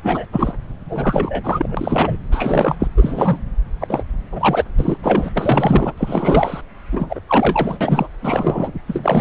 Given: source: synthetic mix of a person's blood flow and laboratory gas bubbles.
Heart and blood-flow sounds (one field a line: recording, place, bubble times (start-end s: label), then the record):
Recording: Doppler ultrasound of blood flow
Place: subclavian vein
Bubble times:
0.03-0.25 s: bubbles
0.32-0.53 s: bubbles
0.89-2.17 s: bubbles
2.31-2.75 s: bubbles
2.79-2.88 s: bubbles
2.96-3.38 s: bubbles
3.80-4.03 s: bubbles
4.32-4.64 s: bubbles
4.79-4.97 s: bubbles
5.03-5.29 s: bubbles
5.34-5.92 s: bubbles
5.97-6.61 s: bubbles
6.92-7.21 s: bubbles
7.27-7.78 s: bubbles
7.80-8.08 s: bubbles
8.22-8.72 s: bubbles
8.87-9.21 s: bubbles
From the record:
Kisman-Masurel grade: 343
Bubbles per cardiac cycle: rolling drumbeat, 9 or more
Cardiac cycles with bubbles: 100%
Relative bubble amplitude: loud (0.450 to 0.775)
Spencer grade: 3 (all of the cardiac periods contain showers or single bubble signals, but not dominating or overriding the cardiac motion signals)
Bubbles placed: anywhere in the cardiac cycle